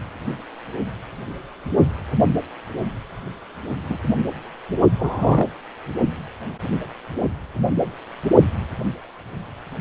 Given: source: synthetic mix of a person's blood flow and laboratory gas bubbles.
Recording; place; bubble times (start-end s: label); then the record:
Doppler ultrasound of blood flow; precordium
3.89-3.97 s: bubbles
4.99-5.47 s: bubbles
From the record:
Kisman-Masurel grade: 122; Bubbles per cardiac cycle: 1 to 2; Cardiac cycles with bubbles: 10 to 50%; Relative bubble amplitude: moderate (0.250 to 0.450); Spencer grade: 2 (many but less than half of the cardiac periods contain bubble signals, singularly or in groups); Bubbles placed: only in the low amplitude regions of the cardiac cycle